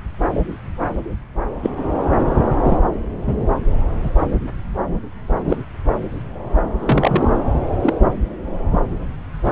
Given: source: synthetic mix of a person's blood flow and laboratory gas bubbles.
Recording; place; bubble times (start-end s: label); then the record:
Doppler ultrasound of blood flow; subclavian vein
1.62-1.70 s: bubbles
1.76-1.88 s: bubbles
2.64-2.77 s: bubbles
3.27-3.47 s: bubbles
4.04-4.10 s: bubbles
5.48-5.57 s: bubbles
6.79-7.30 s: bubbles
7.82-7.94 s: bubbles
9.45-9.52 s: bubbles
From the record:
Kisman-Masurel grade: 123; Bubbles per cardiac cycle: 1 to 2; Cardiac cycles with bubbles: 10 to 50%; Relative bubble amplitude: loud (0.450 to 0.775); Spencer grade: 2 (many but less than half of the cardiac periods contain bubble signals, singularly or in groups); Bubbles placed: anywhere in the cardiac cycle